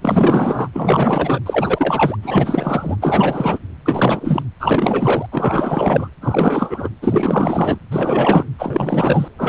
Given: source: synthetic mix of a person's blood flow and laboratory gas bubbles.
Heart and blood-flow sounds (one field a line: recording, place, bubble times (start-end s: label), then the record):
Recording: Doppler ultrasound of blood flow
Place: precordium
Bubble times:
0.01-0.68 s: bubbles
0.72-1.41 s: bubbles
1.46-2.17 s: bubbles
2.22-2.97 s: bubbles
3.01-3.59 s: bubbles
3.85-4.43 s: bubbles
4.60-5.26 s: bubbles
5.32-6.09 s: bubbles
6.21-6.89 s: bubbles
7.02-7.79 s: bubbles
7.91-8.46 s: bubbles
8.58-9.28 s: bubbles
9.38-9.49 s: bubbles
From the record:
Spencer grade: 4 (maximum detectable bubble signal sounding continuously throughout systole and diastole of every cardiac period, and overriding the amplitude of the normal cardiac signals)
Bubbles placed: anywhere in the cardiac cycle